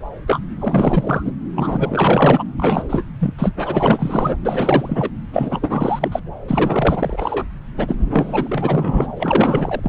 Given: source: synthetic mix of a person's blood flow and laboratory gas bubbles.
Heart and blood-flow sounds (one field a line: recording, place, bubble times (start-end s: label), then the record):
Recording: Doppler ultrasound of blood flow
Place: subclavian vein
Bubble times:
0.26-0.40 s: bubbles
0.61-1.32 s: bubbles
1.55-2.44 s: bubbles
2.57-3.04 s: bubbles
3.19-3.34 s: bubbles
3.38-4.37 s: bubbles
4.42-5.12 s: bubbles
5.33-6.20 s: bubbles
6.47-7.46 s: bubbles
7.77-9.07 s: bubbles
9.16-9.89 s: bubbles
From the record:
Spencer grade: 4 (maximum detectable bubble signal sounding continuously throughout systole and diastole of every cardiac period, and overriding the amplitude of the normal cardiac signals)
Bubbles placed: anywhere in the cardiac cycle